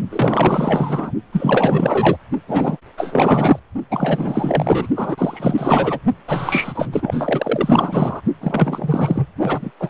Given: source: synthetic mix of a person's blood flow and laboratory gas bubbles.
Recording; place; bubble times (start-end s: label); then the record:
Doppler ultrasound of blood flow; precordium
0.10-1.12 s: bubbles
1.32-2.17 s: bubbles
2.47-2.77 s: bubbles
2.97-3.59 s: bubbles
3.90-4.89 s: bubbles
4.96-5.99 s: bubbles
6.28-8.21 s: bubbles
8.40-9.26 s: bubbles
9.38-9.71 s: bubbles
9.79-9.90 s: bubbles
From the record:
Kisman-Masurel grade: 444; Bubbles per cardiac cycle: continuous sound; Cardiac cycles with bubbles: 100%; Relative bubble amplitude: maximal (0.775 to 0.999); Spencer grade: 4 (maximum detectable bubble signal sounding continuously throughout systole and diastole of every cardiac period, and overriding the amplitude of the normal cardiac signals); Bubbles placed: only in the low amplitude regions of the cardiac cycle